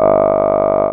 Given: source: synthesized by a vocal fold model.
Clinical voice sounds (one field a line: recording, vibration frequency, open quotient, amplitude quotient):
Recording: sustained vowel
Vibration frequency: 50 Hz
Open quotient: 0.1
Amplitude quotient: 1.2